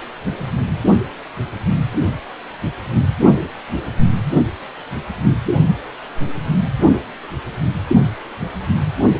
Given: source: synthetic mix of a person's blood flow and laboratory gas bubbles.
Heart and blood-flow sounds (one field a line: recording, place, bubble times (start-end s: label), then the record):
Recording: Doppler ultrasound of blood flow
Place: precordium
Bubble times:
no bubbles
From the record:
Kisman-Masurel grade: 000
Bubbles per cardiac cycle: 0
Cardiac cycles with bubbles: 0%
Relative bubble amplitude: no bubbles discernible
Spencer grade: 0 (complete lack of bubble signals)